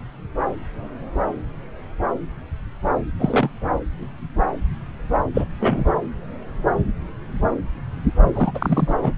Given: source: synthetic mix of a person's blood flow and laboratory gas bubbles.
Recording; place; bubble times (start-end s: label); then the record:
Doppler ultrasound of blood flow; subclavian vein
3.19-3.50 s: bubbles
5.34-5.46 s: bubbles
5.59-5.86 s: bubbles
8.33-8.95 s: bubbles
9.02-9.13 s: bubbles
From the record:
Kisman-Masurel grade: 222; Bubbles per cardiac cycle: several, 3 to 8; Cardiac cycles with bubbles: 10 to 50%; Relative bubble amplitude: moderate (0.250 to 0.450); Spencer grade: 2 (many but less than half of the cardiac periods contain bubble signals, singularly or in groups); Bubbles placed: anywhere in the cardiac cycle